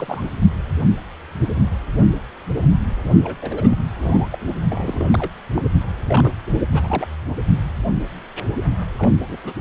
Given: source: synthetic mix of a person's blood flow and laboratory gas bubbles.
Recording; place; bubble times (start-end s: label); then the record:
Doppler ultrasound of blood flow; precordium
0.00-0.24 s: bubbles
3.23-3.35 s: bubbles
3.41-3.86 s: bubbles
4.00-4.38 s: bubbles
4.46-4.54 s: bubbles
4.61-5.31 s: bubbles
5.54-5.62 s: bubbles
6.07-6.31 s: bubbles
6.74-7.07 s: bubbles
8.98-9.12 s: bubbles
9.29-9.37 s: bubbles
9.44-9.53 s: bubbles
From the record:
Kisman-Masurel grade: 232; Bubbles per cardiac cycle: several, 3 to 8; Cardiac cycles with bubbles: 50 to 99%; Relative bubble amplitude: moderate (0.250 to 0.450); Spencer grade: 3 (all of the cardiac periods contain showers or single bubble signals, but not dominating or overriding the cardiac motion signals); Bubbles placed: only in the low amplitude regions of the cardiac cycle